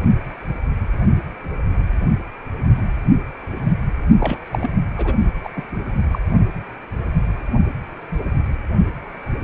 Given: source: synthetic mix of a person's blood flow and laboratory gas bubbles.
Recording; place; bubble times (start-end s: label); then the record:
Doppler ultrasound of blood flow; precordium
4.18-4.38 s: bubbles
4.45-4.74 s: bubbles
4.96-5.14 s: bubbles
5.43-5.49 s: bubbles
5.55-5.62 s: bubbles
6.12-6.18 s: bubbles
From the record:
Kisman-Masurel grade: 222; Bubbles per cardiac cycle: several, 3 to 8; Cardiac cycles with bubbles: 10 to 50%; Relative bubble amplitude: moderate (0.250 to 0.450); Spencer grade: 2 (many but less than half of the cardiac periods contain bubble signals, singularly or in groups); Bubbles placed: only in the low amplitude regions of the cardiac cycle